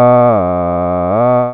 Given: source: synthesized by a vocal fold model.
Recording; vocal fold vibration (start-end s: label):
sustained vowel that changes in the middle
0.00-0.25 s: 123.3 Hz, open quotient 0.44
0.45-1.05 s: 88.4 Hz, open quotient 0.34
1.25-1.54 s: 123.3 Hz, open quotient 0.44